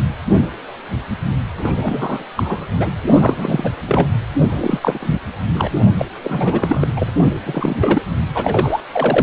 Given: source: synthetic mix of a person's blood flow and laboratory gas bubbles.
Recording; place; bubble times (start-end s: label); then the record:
Doppler ultrasound of blood flow; precordium
1.58-2.23 s: bubbles
2.35-2.67 s: bubbles
2.78-2.92 s: bubbles
3.07-3.74 s: bubbles
3.86-4.07 s: bubbles
4.40-4.79 s: bubbles
4.82-5.20 s: bubbles
5.54-5.71 s: bubbles
5.98-6.07 s: bubbles
6.24-6.88 s: bubbles
6.96-7.12 s: bubbles
7.45-7.77 s: bubbles
7.80-8.03 s: bubbles
8.34-8.80 s: bubbles
8.92-9.23 s: bubbles
From the record:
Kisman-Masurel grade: 333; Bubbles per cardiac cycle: rolling drumbeat, 9 or more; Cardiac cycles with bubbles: 50 to 99%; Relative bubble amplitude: loud (0.450 to 0.775); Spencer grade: 3 (all of the cardiac periods contain showers or single bubble signals, but not dominating or overriding the cardiac motion signals); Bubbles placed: anywhere in the cardiac cycle